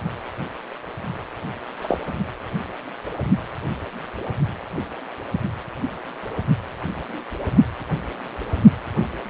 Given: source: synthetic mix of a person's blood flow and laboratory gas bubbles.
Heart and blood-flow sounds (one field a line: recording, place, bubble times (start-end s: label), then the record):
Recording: Doppler ultrasound of blood flow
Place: precordium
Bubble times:
1.81-1.97 s: bubbles
From the record:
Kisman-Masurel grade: 112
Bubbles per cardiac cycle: 1 to 2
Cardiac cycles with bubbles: 1 to 10%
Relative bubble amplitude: moderate (0.250 to 0.450)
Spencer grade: 1 (occasional bubble signal discernible with the cardiac motion signal, with majority of cardiac periods free of bubbles)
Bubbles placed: anywhere in the cardiac cycle